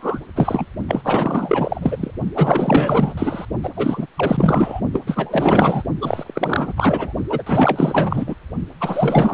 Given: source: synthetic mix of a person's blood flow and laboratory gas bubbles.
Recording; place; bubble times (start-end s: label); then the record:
Doppler ultrasound of blood flow; precordium
0.00-0.20 s: bubbles
0.36-0.66 s: bubbles
0.88-1.02 s: bubbles
1.04-2.11 s: bubbles
2.34-3.14 s: bubbles
3.17-3.45 s: bubbles
3.63-3.71 s: bubbles
3.76-4.06 s: bubbles
4.16-4.81 s: bubbles
4.93-5.03 s: bubbles
5.07-5.83 s: bubbles
6.01-6.73 s: bubbles
6.77-7.12 s: bubbles
7.29-7.43 s: bubbles
7.46-8.35 s: bubbles
8.80-9.34 s: bubbles
From the record:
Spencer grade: 4 (maximum detectable bubble signal sounding continuously throughout systole and diastole of every cardiac period, and overriding the amplitude of the normal cardiac signals); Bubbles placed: only in the low amplitude regions of the cardiac cycle